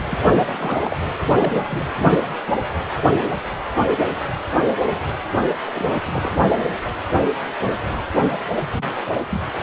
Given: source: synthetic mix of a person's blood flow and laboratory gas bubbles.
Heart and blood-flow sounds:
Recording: Doppler ultrasound of blood flow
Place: precordium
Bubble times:
0.00-0.03 s: bubbles
0.09-0.19 s: bubbles
0.28-0.96 s: bubbles
1.37-1.94 s: bubbles
1.98-2.19 s: bubbles
5.66-5.73 s: bubbles
5.76-5.96 s: bubbles
6.06-6.39 s: bubbles
8.71-8.84 s: bubbles
9.05-9.24 s: bubbles
9.31-9.40 s: bubbles
From the record:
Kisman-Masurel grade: 221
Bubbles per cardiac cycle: several, 3 to 8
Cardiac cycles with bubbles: 10 to 50%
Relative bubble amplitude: barely perceptible (0.100 to 0.250)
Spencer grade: 2 (many but less than half of the cardiac periods contain bubble signals, singularly or in groups)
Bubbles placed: anywhere in the cardiac cycle

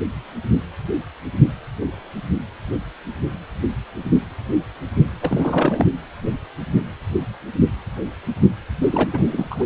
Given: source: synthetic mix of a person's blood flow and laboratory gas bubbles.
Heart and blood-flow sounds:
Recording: Doppler ultrasound of blood flow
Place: precordium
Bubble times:
5.21-5.87 s: bubbles
8.92-9.10 s: bubbles
9.13-9.63 s: bubbles
From the record:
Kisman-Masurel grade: 222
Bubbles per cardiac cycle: several, 3 to 8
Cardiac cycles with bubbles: 10 to 50%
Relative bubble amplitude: moderate (0.250 to 0.450)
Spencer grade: 2 (many but less than half of the cardiac periods contain bubble signals, singularly or in groups)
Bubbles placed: anywhere in the cardiac cycle

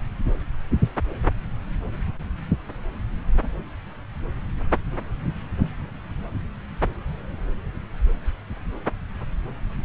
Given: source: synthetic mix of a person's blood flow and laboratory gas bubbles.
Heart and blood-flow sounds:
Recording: Doppler ultrasound of blood flow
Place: subclavian vein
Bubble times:
no bubbles
From the record:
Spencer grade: 0 (complete lack of bubble signals)

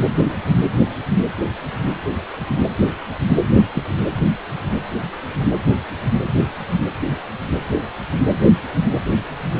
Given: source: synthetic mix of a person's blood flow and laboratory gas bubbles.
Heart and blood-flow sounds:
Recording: Doppler ultrasound of blood flow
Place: precordium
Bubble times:
3.74-3.83 s: bubbles
From the record:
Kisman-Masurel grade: 112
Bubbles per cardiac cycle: 1 to 2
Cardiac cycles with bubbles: 1 to 10%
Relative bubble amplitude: moderate (0.250 to 0.450)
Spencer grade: 1 (occasional bubble signal discernible with the cardiac motion signal, with majority of cardiac periods free of bubbles)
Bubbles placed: anywhere in the cardiac cycle

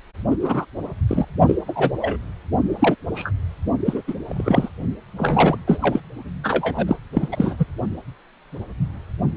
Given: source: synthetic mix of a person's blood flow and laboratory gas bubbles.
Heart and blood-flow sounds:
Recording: Doppler ultrasound of blood flow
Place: precordium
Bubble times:
0.30-0.36 s: bubbles
0.41-0.65 s: bubbles
1.08-1.25 s: bubbles
1.47-1.55 s: bubbles
1.67-1.93 s: bubbles
2.00-2.18 s: bubbles
2.79-2.95 s: bubbles
3.15-3.31 s: bubbles
3.85-4.02 s: bubbles
4.07-4.14 s: bubbles
4.27-4.69 s: bubbles
5.17-5.57 s: bubbles
5.67-5.78 s: bubbles
5.81-6.00 s: bubbles
6.43-6.98 s: bubbles
7.13-7.28 s: bubbles
7.31-7.55 s: bubbles
7.58-7.66 s: bubbles
From the record:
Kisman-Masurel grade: 233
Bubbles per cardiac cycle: several, 3 to 8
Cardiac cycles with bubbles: 50 to 99%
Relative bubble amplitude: loud (0.450 to 0.775)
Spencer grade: 3 (all of the cardiac periods contain showers or single bubble signals, but not dominating or overriding the cardiac motion signals)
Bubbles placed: only in the low amplitude regions of the cardiac cycle

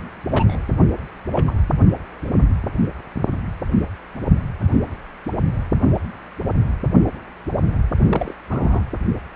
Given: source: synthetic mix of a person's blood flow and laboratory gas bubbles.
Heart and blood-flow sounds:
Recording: Doppler ultrasound of blood flow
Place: precordium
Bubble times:
0.28-0.57 s: bubbles
1.33-1.45 s: bubbles
1.48-1.54 s: bubbles
2.24-2.29 s: bubbles
8.09-8.34 s: bubbles
8.49-8.82 s: bubbles
From the record:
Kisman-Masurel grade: 122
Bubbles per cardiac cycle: 1 to 2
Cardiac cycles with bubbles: 10 to 50%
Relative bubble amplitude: moderate (0.250 to 0.450)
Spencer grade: 2 (many but less than half of the cardiac periods contain bubble signals, singularly or in groups)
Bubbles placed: anywhere in the cardiac cycle

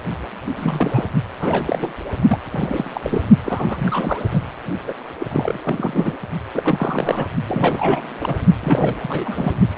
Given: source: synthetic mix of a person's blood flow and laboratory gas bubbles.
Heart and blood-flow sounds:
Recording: Doppler ultrasound of blood flow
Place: precordium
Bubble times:
0.46-0.52 s: bubbles
0.56-1.05 s: bubbles
1.39-1.94 s: bubbles
2.27-2.38 s: bubbles
2.50-2.90 s: bubbles
2.94-3.29 s: bubbles
3.44-4.25 s: bubbles
4.31-4.43 s: bubbles
4.87-4.93 s: bubbles
5.19-6.17 s: bubbles
6.54-7.27 s: bubbles
7.47-8.35 s: bubbles
8.61-8.97 s: bubbles
9.02-9.54 s: bubbles
From the record:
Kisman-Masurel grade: 342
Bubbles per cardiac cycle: rolling drumbeat, 9 or more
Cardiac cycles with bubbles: 100%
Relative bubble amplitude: moderate (0.250 to 0.450)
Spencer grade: 3 (all of the cardiac periods contain showers or single bubble signals, but not dominating or overriding the cardiac motion signals)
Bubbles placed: only in the low amplitude regions of the cardiac cycle

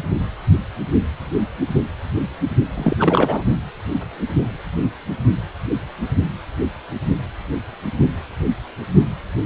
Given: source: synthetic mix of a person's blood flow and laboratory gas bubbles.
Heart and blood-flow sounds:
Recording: Doppler ultrasound of blood flow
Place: precordium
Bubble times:
2.74-3.43 s: bubbles
From the record:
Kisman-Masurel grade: 213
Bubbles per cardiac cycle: several, 3 to 8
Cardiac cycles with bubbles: 1 to 10%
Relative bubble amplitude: loud (0.450 to 0.775)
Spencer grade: 1 (occasional bubble signal discernible with the cardiac motion signal, with majority of cardiac periods free of bubbles)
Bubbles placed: only in the low amplitude regions of the cardiac cycle

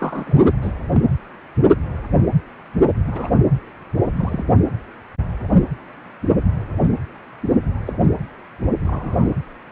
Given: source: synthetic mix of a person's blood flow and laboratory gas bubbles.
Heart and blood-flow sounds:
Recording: Doppler ultrasound of blood flow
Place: precordium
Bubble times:
0.00-0.52 s: bubbles
0.62-0.72 s: bubbles
0.90-1.01 s: bubbles
3.07-3.31 s: bubbles
4.16-4.43 s: bubbles
7.86-7.93 s: bubbles
8.80-9.29 s: bubbles
From the record:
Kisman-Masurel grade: 122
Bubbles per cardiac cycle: 1 to 2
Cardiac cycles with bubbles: 10 to 50%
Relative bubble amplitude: moderate (0.250 to 0.450)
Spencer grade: 2 (many but less than half of the cardiac periods contain bubble signals, singularly or in groups)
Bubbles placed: anywhere in the cardiac cycle

